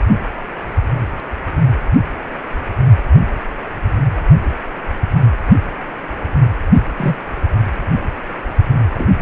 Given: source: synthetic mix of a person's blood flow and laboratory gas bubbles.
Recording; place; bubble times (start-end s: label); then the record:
Doppler ultrasound of blood flow; precordium
6.96-7.16 s: bubbles
8.94-9.09 s: bubbles
From the record:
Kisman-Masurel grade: 122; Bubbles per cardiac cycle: 1 to 2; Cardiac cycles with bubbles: 10 to 50%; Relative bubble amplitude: moderate (0.250 to 0.450); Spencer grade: 2 (many but less than half of the cardiac periods contain bubble signals, singularly or in groups); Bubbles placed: only in the low amplitude regions of the cardiac cycle